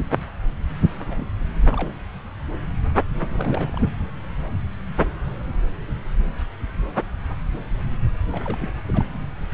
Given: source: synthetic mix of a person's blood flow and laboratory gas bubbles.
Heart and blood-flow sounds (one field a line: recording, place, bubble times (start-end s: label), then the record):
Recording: Doppler ultrasound of blood flow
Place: subclavian vein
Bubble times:
1.06-1.27 s: bubbles
1.72-1.91 s: bubbles
3.17-3.89 s: bubbles
8.32-8.74 s: bubbles
8.86-9.05 s: bubbles
From the record:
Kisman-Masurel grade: 221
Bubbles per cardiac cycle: several, 3 to 8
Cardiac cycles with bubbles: 10 to 50%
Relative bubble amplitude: barely perceptible (0.100 to 0.250)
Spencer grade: 2 (many but less than half of the cardiac periods contain bubble signals, singularly or in groups)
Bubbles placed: anywhere in the cardiac cycle